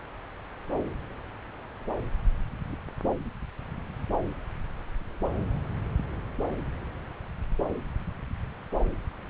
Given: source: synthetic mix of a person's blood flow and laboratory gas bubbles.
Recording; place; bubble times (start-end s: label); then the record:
Doppler ultrasound of blood flow; subclavian vein
no bubbles
From the record:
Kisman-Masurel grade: 000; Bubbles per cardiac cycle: 0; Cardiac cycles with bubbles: 0%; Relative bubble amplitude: no bubbles discernible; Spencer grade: 0 (complete lack of bubble signals)